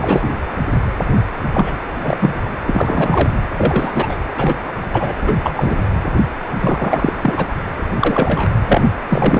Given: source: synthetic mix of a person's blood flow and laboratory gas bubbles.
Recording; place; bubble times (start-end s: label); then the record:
Doppler ultrasound of blood flow; precordium
0.01-0.29 s: bubbles
1.53-1.73 s: bubbles
1.99-2.34 s: bubbles
2.66-3.29 s: bubbles
3.57-4.17 s: bubbles
4.37-4.56 s: bubbles
4.92-5.13 s: bubbles
5.21-5.35 s: bubbles
5.43-5.76 s: bubbles
6.60-7.12 s: bubbles
7.21-7.47 s: bubbles
7.93-8.49 s: bubbles
8.68-8.81 s: bubbles
9.08-9.40 s: bubbles
From the record:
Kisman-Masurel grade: 243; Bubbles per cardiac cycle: several, 3 to 8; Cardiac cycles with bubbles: 100%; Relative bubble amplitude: loud (0.450 to 0.775); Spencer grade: 3 (all of the cardiac periods contain showers or single bubble signals, but not dominating or overriding the cardiac motion signals); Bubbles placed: anywhere in the cardiac cycle